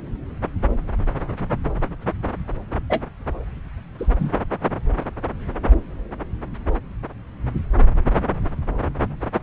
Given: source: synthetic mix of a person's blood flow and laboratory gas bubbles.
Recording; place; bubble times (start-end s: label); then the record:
Doppler ultrasound of blood flow; subclavian vein
2.90-3.00 s: bubbles
3.98-4.32 s: bubbles
From the record:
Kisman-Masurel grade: 122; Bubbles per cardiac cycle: 1 to 2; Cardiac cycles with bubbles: 10 to 50%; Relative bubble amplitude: moderate (0.250 to 0.450); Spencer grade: 2 (many but less than half of the cardiac periods contain bubble signals, singularly or in groups); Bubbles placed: anywhere in the cardiac cycle